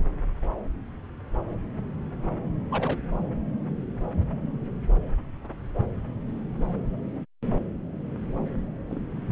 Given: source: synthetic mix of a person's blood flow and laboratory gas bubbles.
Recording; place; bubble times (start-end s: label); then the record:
Doppler ultrasound of blood flow; subclavian vein
0.41-0.46 s: bubbles
2.71-2.98 s: bubbles
8.89-9.02 s: bubbles
From the record:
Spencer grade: 2 (many but less than half of the cardiac periods contain bubble signals, singularly or in groups); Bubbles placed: anywhere in the cardiac cycle